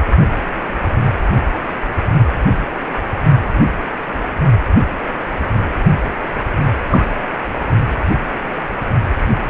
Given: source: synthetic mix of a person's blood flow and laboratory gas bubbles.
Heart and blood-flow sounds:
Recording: Doppler ultrasound of blood flow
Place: precordium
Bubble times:
6.90-7.05 s: bubbles
From the record:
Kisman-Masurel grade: 113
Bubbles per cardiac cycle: 1 to 2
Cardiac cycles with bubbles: 1 to 10%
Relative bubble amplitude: loud (0.450 to 0.775)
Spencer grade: 1 (occasional bubble signal discernible with the cardiac motion signal, with majority of cardiac periods free of bubbles)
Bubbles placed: only in the low amplitude regions of the cardiac cycle

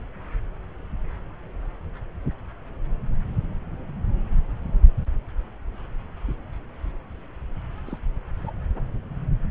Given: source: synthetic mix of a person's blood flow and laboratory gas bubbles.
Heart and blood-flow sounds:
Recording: Doppler ultrasound of blood flow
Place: subclavian vein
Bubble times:
7.86-7.97 s: bubbles
8.38-8.53 s: bubbles
From the record:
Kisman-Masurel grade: 111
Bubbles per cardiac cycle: 1 to 2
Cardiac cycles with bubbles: 1 to 10%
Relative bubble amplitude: barely perceptible (0.100 to 0.250)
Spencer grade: 1 (occasional bubble signal discernible with the cardiac motion signal, with majority of cardiac periods free of bubbles)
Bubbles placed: anywhere in the cardiac cycle

